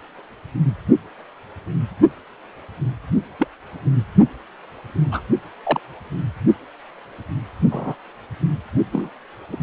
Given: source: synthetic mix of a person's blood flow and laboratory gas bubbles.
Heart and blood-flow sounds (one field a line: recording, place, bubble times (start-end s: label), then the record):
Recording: Doppler ultrasound of blood flow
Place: precordium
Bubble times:
3.39-3.49 s: bubbles
5.11-5.21 s: bubbles
5.65-5.80 s: bubbles
7.71-7.95 s: bubbles
8.93-9.09 s: bubbles
9.49-9.57 s: bubbles
From the record:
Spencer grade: 2 (many but less than half of the cardiac periods contain bubble signals, singularly or in groups)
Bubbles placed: only in the low amplitude regions of the cardiac cycle